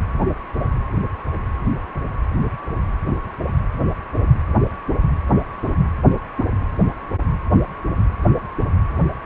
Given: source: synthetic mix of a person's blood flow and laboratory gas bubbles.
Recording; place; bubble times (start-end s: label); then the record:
Doppler ultrasound of blood flow; precordium
no bubbles
From the record:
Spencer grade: 0 (complete lack of bubble signals)